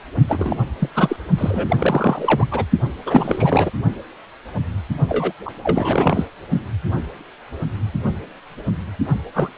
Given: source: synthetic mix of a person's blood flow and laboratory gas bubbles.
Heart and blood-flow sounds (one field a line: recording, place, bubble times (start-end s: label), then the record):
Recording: Doppler ultrasound of blood flow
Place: precordium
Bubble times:
0.28-0.57 s: bubbles
0.79-0.89 s: bubbles
0.94-1.16 s: bubbles
1.38-2.47 s: bubbles
2.51-2.65 s: bubbles
3.06-3.71 s: bubbles
5.09-5.32 s: bubbles
5.45-5.50 s: bubbles
5.63-6.25 s: bubbles
9.34-9.50 s: bubbles
From the record:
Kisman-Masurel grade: 333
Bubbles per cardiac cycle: rolling drumbeat, 9 or more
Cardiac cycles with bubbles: 50 to 99%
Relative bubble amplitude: loud (0.450 to 0.775)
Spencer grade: 3 (all of the cardiac periods contain showers or single bubble signals, but not dominating or overriding the cardiac motion signals)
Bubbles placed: only in the low amplitude regions of the cardiac cycle